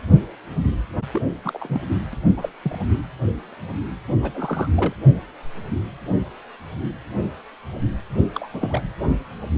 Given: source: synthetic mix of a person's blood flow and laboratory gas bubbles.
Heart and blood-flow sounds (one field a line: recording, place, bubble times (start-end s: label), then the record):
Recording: Doppler ultrasound of blood flow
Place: precordium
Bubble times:
1.11-1.22 s: bubbles
1.44-1.80 s: bubbles
2.13-2.15 s: bubbles
2.37-2.49 s: bubbles
2.62-2.79 s: bubbles
4.08-4.13 s: bubbles
4.22-4.32 s: bubbles
4.34-4.68 s: bubbles
4.75-4.94 s: bubbles
8.34-8.48 s: bubbles
8.53-8.81 s: bubbles
From the record:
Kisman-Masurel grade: 221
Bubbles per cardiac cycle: several, 3 to 8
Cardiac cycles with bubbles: 10 to 50%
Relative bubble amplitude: barely perceptible (0.100 to 0.250)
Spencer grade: 2 (many but less than half of the cardiac periods contain bubble signals, singularly or in groups)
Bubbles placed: anywhere in the cardiac cycle